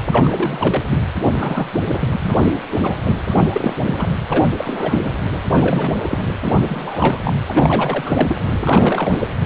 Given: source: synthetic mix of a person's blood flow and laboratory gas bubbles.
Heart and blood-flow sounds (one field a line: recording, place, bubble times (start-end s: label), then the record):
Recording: Doppler ultrasound of blood flow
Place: precordium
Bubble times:
0.11-0.82 s: bubbles
0.90-1.00 s: bubbles
1.31-1.69 s: bubbles
1.73-1.80 s: bubbles
1.85-2.16 s: bubbles
2.19-2.58 s: bubbles
2.74-2.98 s: bubbles
3.04-3.19 s: bubbles
3.29-3.76 s: bubbles
3.86-4.08 s: bubbles
4.29-4.48 s: bubbles
4.57-5.11 s: bubbles
5.32-5.39 s: bubbles
5.51-5.95 s: bubbles
5.97-6.25 s: bubbles
6.42-6.54 s: bubbles
6.62-7.20 s: bubbles
7.24-7.33 s: bubbles
7.46-8.36 s: bubbles
8.50-9.28 s: bubbles
From the record:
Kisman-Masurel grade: 342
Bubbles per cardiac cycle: rolling drumbeat, 9 or more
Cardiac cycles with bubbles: 100%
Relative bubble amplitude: moderate (0.250 to 0.450)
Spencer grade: 3 (all of the cardiac periods contain showers or single bubble signals, but not dominating or overriding the cardiac motion signals)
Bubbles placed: anywhere in the cardiac cycle